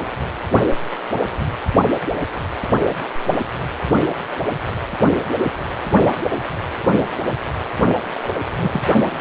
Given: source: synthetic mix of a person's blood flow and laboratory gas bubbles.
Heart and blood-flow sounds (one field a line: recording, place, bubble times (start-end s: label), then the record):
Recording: Doppler ultrasound of blood flow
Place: precordium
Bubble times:
8.22-8.28 s: bubbles
8.59-8.82 s: bubbles
From the record:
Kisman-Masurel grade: 112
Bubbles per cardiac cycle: 1 to 2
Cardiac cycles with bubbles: 1 to 10%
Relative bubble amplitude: moderate (0.250 to 0.450)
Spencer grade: 1 (occasional bubble signal discernible with the cardiac motion signal, with majority of cardiac periods free of bubbles)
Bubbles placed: only in the low amplitude regions of the cardiac cycle